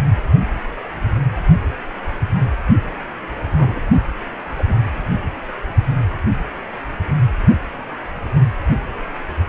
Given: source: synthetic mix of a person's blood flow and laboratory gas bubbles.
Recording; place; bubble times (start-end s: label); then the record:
Doppler ultrasound of blood flow; precordium
3.57-3.82 s: bubbles
4.50-4.79 s: bubbles
From the record:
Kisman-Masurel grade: 122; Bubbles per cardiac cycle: 1 to 2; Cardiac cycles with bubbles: 10 to 50%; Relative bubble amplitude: moderate (0.250 to 0.450); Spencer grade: 2 (many but less than half of the cardiac periods contain bubble signals, singularly or in groups); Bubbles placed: only in the low amplitude regions of the cardiac cycle